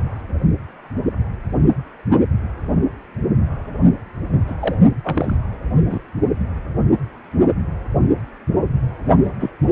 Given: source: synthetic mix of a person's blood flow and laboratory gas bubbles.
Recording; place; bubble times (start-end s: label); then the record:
Doppler ultrasound of blood flow; precordium
4.47-4.55 s: bubbles
4.60-4.75 s: bubbles
5.04-5.37 s: bubbles
5.86-5.99 s: bubbles
9.24-9.32 s: bubbles
9.40-9.50 s: bubbles
9.70-9.72 s: bubbles
From the record:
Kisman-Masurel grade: 222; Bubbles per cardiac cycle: several, 3 to 8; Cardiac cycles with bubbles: 10 to 50%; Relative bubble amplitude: moderate (0.250 to 0.450); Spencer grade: 2 (many but less than half of the cardiac periods contain bubble signals, singularly or in groups); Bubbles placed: anywhere in the cardiac cycle